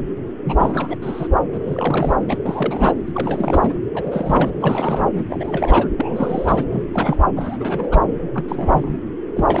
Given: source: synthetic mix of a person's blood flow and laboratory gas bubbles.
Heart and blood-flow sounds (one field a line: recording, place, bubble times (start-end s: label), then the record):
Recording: Doppler ultrasound of blood flow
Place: subclavian vein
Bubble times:
0.44-0.96 s: bubbles
1.01-1.27 s: bubbles
1.52-2.38 s: bubbles
2.46-2.94 s: bubbles
3.06-3.75 s: bubbles
3.94-4.50 s: bubbles
4.60-5.25 s: bubbles
5.28-5.88 s: bubbles
5.98-6.65 s: bubbles
6.70-6.83 s: bubbles
6.92-7.27 s: bubbles
7.36-8.01 s: bubbles
8.35-8.46 s: bubbles
8.48-8.99 s: bubbles
9.36-9.60 s: bubbles
From the record:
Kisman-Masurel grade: 342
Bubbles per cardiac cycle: rolling drumbeat, 9 or more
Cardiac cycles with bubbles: 100%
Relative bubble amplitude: moderate (0.250 to 0.450)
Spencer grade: 3 (all of the cardiac periods contain showers or single bubble signals, but not dominating or overriding the cardiac motion signals)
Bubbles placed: anywhere in the cardiac cycle